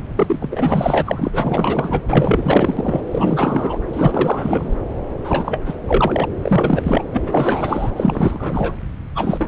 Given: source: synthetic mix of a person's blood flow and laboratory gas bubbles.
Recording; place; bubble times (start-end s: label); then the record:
Doppler ultrasound of blood flow; subclavian vein
0.18-2.01 s: bubbles
2.08-3.01 s: bubbles
3.11-3.82 s: bubbles
3.93-4.74 s: bubbles
5.24-5.61 s: bubbles
5.65-5.75 s: bubbles
5.87-6.26 s: bubbles
6.42-7.04 s: bubbles
7.14-7.91 s: bubbles
7.96-8.76 s: bubbles
9.15-9.48 s: bubbles
From the record:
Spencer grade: 4 (maximum detectable bubble signal sounding continuously throughout systole and diastole of every cardiac period, and overriding the amplitude of the normal cardiac signals); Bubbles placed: anywhere in the cardiac cycle